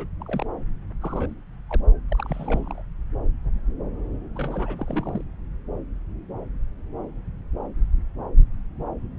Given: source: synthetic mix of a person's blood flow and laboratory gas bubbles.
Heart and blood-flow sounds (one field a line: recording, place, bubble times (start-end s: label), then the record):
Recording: Doppler ultrasound of blood flow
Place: subclavian vein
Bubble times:
0.00-0.07 s: bubbles
0.20-0.46 s: bubbles
1.01-1.34 s: bubbles
1.69-1.80 s: bubbles
2.12-2.82 s: bubbles
4.35-5.23 s: bubbles
From the record:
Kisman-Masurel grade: 221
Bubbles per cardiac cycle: several, 3 to 8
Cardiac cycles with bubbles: 10 to 50%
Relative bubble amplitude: barely perceptible (0.100 to 0.250)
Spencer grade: 2 (many but less than half of the cardiac periods contain bubble signals, singularly or in groups)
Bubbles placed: anywhere in the cardiac cycle